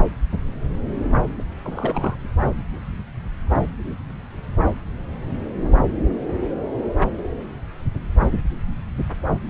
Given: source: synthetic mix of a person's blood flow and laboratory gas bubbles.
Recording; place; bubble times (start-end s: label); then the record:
Doppler ultrasound of blood flow; subclavian vein
1.10-1.18 s: bubbles
1.39-1.43 s: bubbles
1.64-2.16 s: bubbles
From the record:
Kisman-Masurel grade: 211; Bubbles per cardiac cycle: several, 3 to 8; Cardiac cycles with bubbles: 1 to 10%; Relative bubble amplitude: barely perceptible (0.100 to 0.250); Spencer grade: 1 (occasional bubble signal discernible with the cardiac motion signal, with majority of cardiac periods free of bubbles); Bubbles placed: anywhere in the cardiac cycle